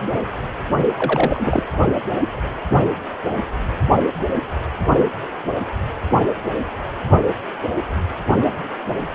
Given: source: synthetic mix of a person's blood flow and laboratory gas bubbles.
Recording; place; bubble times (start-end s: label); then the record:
Doppler ultrasound of blood flow; precordium
0.97-1.63 s: bubbles
From the record:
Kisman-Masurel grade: 212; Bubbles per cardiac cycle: several, 3 to 8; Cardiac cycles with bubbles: 1 to 10%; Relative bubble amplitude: moderate (0.250 to 0.450); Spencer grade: 1 (occasional bubble signal discernible with the cardiac motion signal, with majority of cardiac periods free of bubbles); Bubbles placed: only in the low amplitude regions of the cardiac cycle